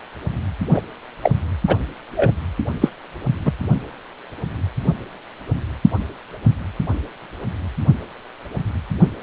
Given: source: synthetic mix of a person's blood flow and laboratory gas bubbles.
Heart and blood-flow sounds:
Doppler ultrasound of blood flow; precordium
0.73-0.81 s: bubbles
1.23-1.31 s: bubbles
1.67-1.77 s: bubbles
2.16-2.31 s: bubbles
2.81-2.89 s: bubbles
3.44-3.52 s: bubbles
From the record:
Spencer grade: 2 (many but less than half of the cardiac periods contain bubble signals, singularly or in groups); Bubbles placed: only in the low amplitude regions of the cardiac cycle

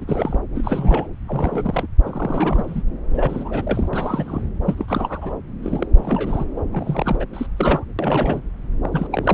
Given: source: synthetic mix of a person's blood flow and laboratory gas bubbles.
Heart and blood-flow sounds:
Doppler ultrasound of blood flow; subclavian vein
0.00-0.39 s: bubbles
0.54-1.07 s: bubbles
1.28-1.86 s: bubbles
2.05-2.82 s: bubbles
3.13-3.89 s: bubbles
3.93-4.42 s: bubbles
4.66-4.75 s: bubbles
4.78-5.33 s: bubbles
5.62-5.87 s: bubbles
5.96-6.46 s: bubbles
6.56-6.61 s: bubbles
6.70-7.17 s: bubbles
7.20-7.25 s: bubbles
7.33-7.46 s: bubbles
7.57-7.84 s: bubbles
7.99-8.42 s: bubbles
8.82-8.89 s: bubbles
8.92-9.07 s: bubbles
9.12-9.34 s: bubbles
From the record:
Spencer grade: 3 (all of the cardiac periods contain showers or single bubble signals, but not dominating or overriding the cardiac motion signals); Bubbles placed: anywhere in the cardiac cycle

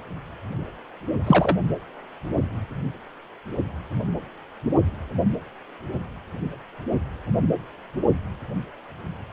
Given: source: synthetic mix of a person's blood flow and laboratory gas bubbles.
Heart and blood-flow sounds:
Doppler ultrasound of blood flow; precordium
1.27-1.57 s: bubbles
From the record:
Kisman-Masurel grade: 223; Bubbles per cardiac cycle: several, 3 to 8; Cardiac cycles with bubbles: 10 to 50%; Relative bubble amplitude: loud (0.450 to 0.775); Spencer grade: 2 (many but less than half of the cardiac periods contain bubble signals, singularly or in groups); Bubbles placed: only in the low amplitude regions of the cardiac cycle

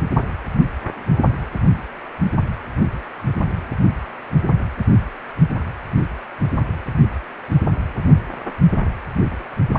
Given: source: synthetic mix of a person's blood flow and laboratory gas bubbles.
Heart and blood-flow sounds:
Doppler ultrasound of blood flow; precordium
8.62-8.69 s: bubbles
From the record:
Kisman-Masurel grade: 111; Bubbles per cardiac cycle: 1 to 2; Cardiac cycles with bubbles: 1 to 10%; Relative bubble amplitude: barely perceptible (0.100 to 0.250); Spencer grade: 1 (occasional bubble signal discernible with the cardiac motion signal, with majority of cardiac periods free of bubbles); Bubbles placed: anywhere in the cardiac cycle

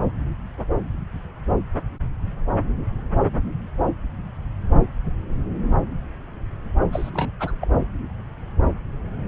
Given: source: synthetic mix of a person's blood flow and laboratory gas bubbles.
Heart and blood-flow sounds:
Doppler ultrasound of blood flow; subclavian vein
6.92-7.10 s: bubbles
7.13-7.30 s: bubbles
7.39-7.56 s: bubbles
7.60-7.68 s: bubbles
From the record:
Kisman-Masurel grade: 211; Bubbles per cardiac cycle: several, 3 to 8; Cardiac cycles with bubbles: 1 to 10%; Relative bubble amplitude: barely perceptible (0.100 to 0.250); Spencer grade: 1 (occasional bubble signal discernible with the cardiac motion signal, with majority of cardiac periods free of bubbles); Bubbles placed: anywhere in the cardiac cycle

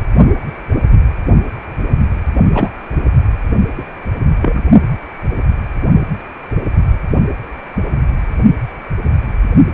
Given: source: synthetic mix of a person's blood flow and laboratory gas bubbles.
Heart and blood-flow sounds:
Doppler ultrasound of blood flow; precordium
2.53-2.69 s: bubbles
3.77-3.83 s: bubbles
4.42-4.63 s: bubbles
From the record:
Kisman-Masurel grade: 123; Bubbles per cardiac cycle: 1 to 2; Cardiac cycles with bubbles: 10 to 50%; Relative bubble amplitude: loud (0.450 to 0.775); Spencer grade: 2 (many but less than half of the cardiac periods contain bubble signals, singularly or in groups); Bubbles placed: only in the low amplitude regions of the cardiac cycle

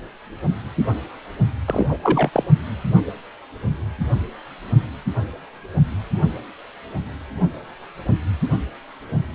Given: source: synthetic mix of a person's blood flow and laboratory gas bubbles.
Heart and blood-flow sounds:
Doppler ultrasound of blood flow; precordium
1.66-1.98 s: bubbles
2.02-2.29 s: bubbles
2.32-2.44 s: bubbles
From the record:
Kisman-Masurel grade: 212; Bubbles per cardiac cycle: several, 3 to 8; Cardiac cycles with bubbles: 1 to 10%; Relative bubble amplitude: moderate (0.250 to 0.450); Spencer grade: 1 (occasional bubble signal discernible with the cardiac motion signal, with majority of cardiac periods free of bubbles); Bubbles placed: only in the low amplitude regions of the cardiac cycle

